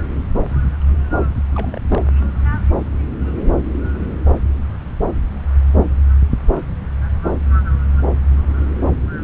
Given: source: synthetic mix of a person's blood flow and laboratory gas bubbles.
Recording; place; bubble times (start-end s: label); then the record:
Doppler ultrasound of blood flow; subclavian vein
0.00-0.05 s: bubbles
1.54-1.80 s: bubbles
1.89-2.02 s: bubbles
From the record:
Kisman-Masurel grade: 211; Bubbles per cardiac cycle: several, 3 to 8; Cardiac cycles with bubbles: 1 to 10%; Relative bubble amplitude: barely perceptible (0.100 to 0.250); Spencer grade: 1 (occasional bubble signal discernible with the cardiac motion signal, with majority of cardiac periods free of bubbles); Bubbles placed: anywhere in the cardiac cycle